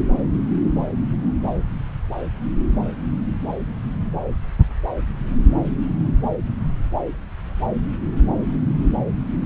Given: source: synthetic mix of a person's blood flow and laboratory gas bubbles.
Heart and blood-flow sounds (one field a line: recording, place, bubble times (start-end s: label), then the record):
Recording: Doppler ultrasound of blood flow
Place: subclavian vein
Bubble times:
no bubbles
From the record:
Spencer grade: 0 (complete lack of bubble signals)